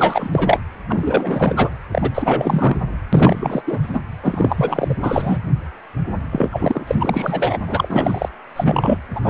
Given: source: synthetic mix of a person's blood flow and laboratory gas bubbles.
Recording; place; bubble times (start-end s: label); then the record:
Doppler ultrasound of blood flow; precordium
0.00-0.60 s: bubbles
0.89-1.74 s: bubbles
1.92-2.11 s: bubbles
2.14-2.77 s: bubbles
3.12-3.79 s: bubbles
3.83-4.00 s: bubbles
4.22-4.95 s: bubbles
5.00-5.38 s: bubbles
6.32-7.58 s: bubbles
7.67-8.29 s: bubbles
8.56-8.97 s: bubbles
9.15-9.21 s: bubbles
9.23-9.30 s: bubbles
From the record:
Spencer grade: 4 (maximum detectable bubble signal sounding continuously throughout systole and diastole of every cardiac period, and overriding the amplitude of the normal cardiac signals); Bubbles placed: anywhere in the cardiac cycle